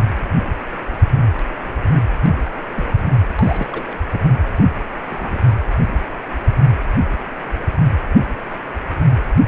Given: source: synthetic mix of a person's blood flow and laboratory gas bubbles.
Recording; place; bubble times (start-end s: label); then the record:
Doppler ultrasound of blood flow; precordium
0.11-0.20 s: bubbles
1.90-2.05 s: bubbles
2.23-2.33 s: bubbles
2.74-2.93 s: bubbles
3.39-4.26 s: bubbles
4.56-4.64 s: bubbles
5.10-5.54 s: bubbles
From the record:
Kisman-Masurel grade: 221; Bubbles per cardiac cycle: several, 3 to 8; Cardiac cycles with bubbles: 10 to 50%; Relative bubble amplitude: barely perceptible (0.100 to 0.250); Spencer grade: 2 (many but less than half of the cardiac periods contain bubble signals, singularly or in groups); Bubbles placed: anywhere in the cardiac cycle